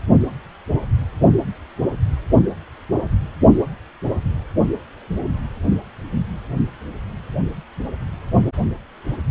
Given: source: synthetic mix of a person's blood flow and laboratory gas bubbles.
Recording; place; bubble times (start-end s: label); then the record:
Doppler ultrasound of blood flow; precordium
no bubbles
From the record:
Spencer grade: 0 (complete lack of bubble signals)